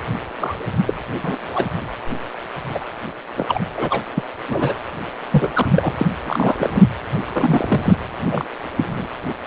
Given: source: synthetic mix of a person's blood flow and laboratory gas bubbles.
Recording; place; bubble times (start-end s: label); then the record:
Doppler ultrasound of blood flow; precordium
0.39-0.55 s: bubbles
0.87-0.94 s: bubbles
1.24-1.38 s: bubbles
1.53-1.66 s: bubbles
2.69-2.85 s: bubbles
3.37-3.60 s: bubbles
3.77-4.02 s: bubbles
4.17-4.24 s: bubbles
4.49-4.74 s: bubbles
5.31-5.50 s: bubbles
5.55-5.67 s: bubbles
5.70-5.94 s: bubbles
5.98-6.06 s: bubbles
6.26-6.84 s: bubbles
7.33-7.96 s: bubbles
8.31-8.45 s: bubbles
8.77-9.07 s: bubbles
From the record:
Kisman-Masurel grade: 242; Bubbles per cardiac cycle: several, 3 to 8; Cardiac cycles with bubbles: 100%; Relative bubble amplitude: moderate (0.250 to 0.450); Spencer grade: 3 (all of the cardiac periods contain showers or single bubble signals, but not dominating or overriding the cardiac motion signals); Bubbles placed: anywhere in the cardiac cycle